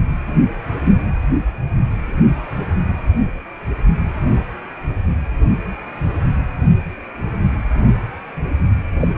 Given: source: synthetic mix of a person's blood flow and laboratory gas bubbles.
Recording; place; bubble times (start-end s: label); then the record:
Doppler ultrasound of blood flow; precordium
8.99-9.08 s: bubbles
From the record:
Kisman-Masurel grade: 122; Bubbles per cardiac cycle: 1 to 2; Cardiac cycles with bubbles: 10 to 50%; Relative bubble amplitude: moderate (0.250 to 0.450); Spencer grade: 2 (many but less than half of the cardiac periods contain bubble signals, singularly or in groups); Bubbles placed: anywhere in the cardiac cycle